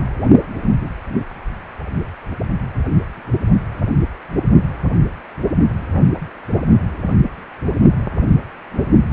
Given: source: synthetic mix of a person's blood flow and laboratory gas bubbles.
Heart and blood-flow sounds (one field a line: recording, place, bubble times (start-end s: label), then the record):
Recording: Doppler ultrasound of blood flow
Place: precordium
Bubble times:
no bubbles
From the record:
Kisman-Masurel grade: 000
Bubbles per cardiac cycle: 0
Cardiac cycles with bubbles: 0%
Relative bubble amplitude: no bubbles discernible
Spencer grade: 0 (complete lack of bubble signals)